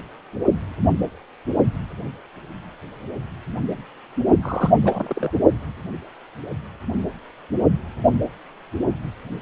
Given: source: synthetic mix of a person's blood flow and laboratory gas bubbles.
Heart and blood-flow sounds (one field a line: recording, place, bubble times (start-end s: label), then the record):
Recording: Doppler ultrasound of blood flow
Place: precordium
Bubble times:
4.42-4.73 s: bubbles
4.82-5.30 s: bubbles
From the record:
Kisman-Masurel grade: 211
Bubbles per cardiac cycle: several, 3 to 8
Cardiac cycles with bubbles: 1 to 10%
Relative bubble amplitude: barely perceptible (0.100 to 0.250)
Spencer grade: 1 (occasional bubble signal discernible with the cardiac motion signal, with majority of cardiac periods free of bubbles)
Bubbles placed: only in the low amplitude regions of the cardiac cycle